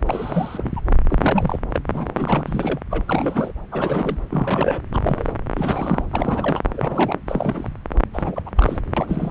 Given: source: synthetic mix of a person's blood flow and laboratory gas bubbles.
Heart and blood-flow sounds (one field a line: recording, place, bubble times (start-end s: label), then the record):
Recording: Doppler ultrasound of blood flow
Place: subclavian vein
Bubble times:
0.06-0.71 s: bubbles
0.76-0.80 s: bubbles
1.09-1.59 s: bubbles
1.73-1.80 s: bubbles
1.93-2.80 s: bubbles
2.91-3.04 s: bubbles
3.08-3.52 s: bubbles
3.71-4.18 s: bubbles
4.30-4.81 s: bubbles
4.92-5.33 s: bubbles
5.55-6.05 s: bubbles
6.12-6.62 s: bubbles
6.72-7.21 s: bubbles
7.27-7.69 s: bubbles
8.13-8.42 s: bubbles
8.46-8.50 s: bubbles
8.57-8.79 s: bubbles
8.96-9.31 s: bubbles
From the record:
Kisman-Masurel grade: 342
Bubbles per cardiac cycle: rolling drumbeat, 9 or more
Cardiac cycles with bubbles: 100%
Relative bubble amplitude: moderate (0.250 to 0.450)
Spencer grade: 3 (all of the cardiac periods contain showers or single bubble signals, but not dominating or overriding the cardiac motion signals)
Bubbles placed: anywhere in the cardiac cycle